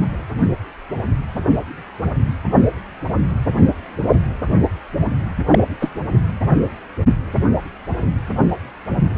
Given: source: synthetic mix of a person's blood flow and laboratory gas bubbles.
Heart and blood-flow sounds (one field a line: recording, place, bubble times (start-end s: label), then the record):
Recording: Doppler ultrasound of blood flow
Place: precordium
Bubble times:
5.52-5.63 s: bubbles
5.79-5.89 s: bubbles
From the record:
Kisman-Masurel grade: 213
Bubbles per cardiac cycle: several, 3 to 8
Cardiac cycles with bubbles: 1 to 10%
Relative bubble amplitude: loud (0.450 to 0.775)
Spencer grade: 1 (occasional bubble signal discernible with the cardiac motion signal, with majority of cardiac periods free of bubbles)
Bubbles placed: only in the low amplitude regions of the cardiac cycle